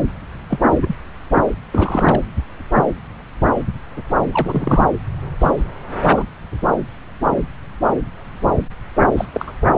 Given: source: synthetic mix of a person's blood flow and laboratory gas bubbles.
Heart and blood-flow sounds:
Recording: Doppler ultrasound of blood flow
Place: subclavian vein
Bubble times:
0.49-0.59 s: bubbles
0.82-0.95 s: bubbles
1.72-2.22 s: bubbles
4.32-4.87 s: bubbles
5.39-5.64 s: bubbles
6.03-6.26 s: bubbles
9.17-9.26 s: bubbles
9.33-9.53 s: bubbles
From the record:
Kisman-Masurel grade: 222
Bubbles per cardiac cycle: several, 3 to 8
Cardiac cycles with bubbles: 10 to 50%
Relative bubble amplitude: moderate (0.250 to 0.450)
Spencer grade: 2 (many but less than half of the cardiac periods contain bubble signals, singularly or in groups)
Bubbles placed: anywhere in the cardiac cycle

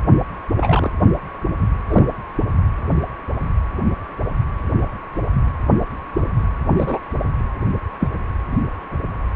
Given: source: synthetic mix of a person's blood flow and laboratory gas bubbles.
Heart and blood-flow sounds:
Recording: Doppler ultrasound of blood flow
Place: precordium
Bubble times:
0.55-0.91 s: bubbles
1.88-2.04 s: bubbles
6.78-6.99 s: bubbles
8.00-8.08 s: bubbles
From the record:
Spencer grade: 2 (many but less than half of the cardiac periods contain bubble signals, singularly or in groups)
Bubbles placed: anywhere in the cardiac cycle

